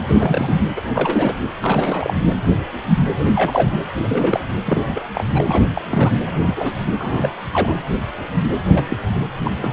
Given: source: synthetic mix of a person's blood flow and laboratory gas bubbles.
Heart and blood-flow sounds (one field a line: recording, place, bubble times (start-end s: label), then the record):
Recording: Doppler ultrasound of blood flow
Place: precordium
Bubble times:
0.08-0.55 s: bubbles
0.76-0.82 s: bubbles
0.93-1.35 s: bubbles
1.62-2.14 s: bubbles
3.11-3.77 s: bubbles
3.95-4.40 s: bubbles
4.66-5.03 s: bubbles
5.14-5.23 s: bubbles
5.33-5.43 s: bubbles
5.46-5.64 s: bubbles
5.74-5.81 s: bubbles
5.89-6.11 s: bubbles
6.25-6.76 s: bubbles
6.98-7.29 s: bubbles
7.51-7.74 s: bubbles
8.74-8.84 s: bubbles
8.89-8.97 s: bubbles
9.44-9.73 s: bubbles
From the record:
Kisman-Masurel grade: 232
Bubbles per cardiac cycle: several, 3 to 8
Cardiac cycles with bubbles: 50 to 99%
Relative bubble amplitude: moderate (0.250 to 0.450)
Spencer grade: 3 (all of the cardiac periods contain showers or single bubble signals, but not dominating or overriding the cardiac motion signals)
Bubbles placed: anywhere in the cardiac cycle